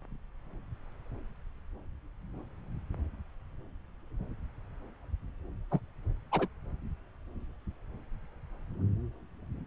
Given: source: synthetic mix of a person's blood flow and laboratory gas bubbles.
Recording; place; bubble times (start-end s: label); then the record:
Doppler ultrasound of blood flow; subclavian vein
5.71-5.79 s: bubbles
6.31-6.47 s: bubbles
From the record:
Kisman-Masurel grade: 121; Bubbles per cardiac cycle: 1 to 2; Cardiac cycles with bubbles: 10 to 50%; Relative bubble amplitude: barely perceptible (0.100 to 0.250); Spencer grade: 2 (many but less than half of the cardiac periods contain bubble signals, singularly or in groups); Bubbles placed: anywhere in the cardiac cycle